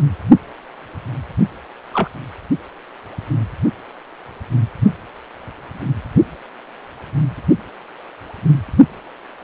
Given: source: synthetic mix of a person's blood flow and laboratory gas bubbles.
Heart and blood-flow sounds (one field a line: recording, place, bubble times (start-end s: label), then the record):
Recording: Doppler ultrasound of blood flow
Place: precordium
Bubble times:
1.93-2.08 s: bubbles
From the record:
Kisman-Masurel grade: 122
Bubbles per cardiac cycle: 1 to 2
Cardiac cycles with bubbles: 10 to 50%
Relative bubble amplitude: moderate (0.250 to 0.450)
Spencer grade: 2 (many but less than half of the cardiac periods contain bubble signals, singularly or in groups)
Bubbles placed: only in the low amplitude regions of the cardiac cycle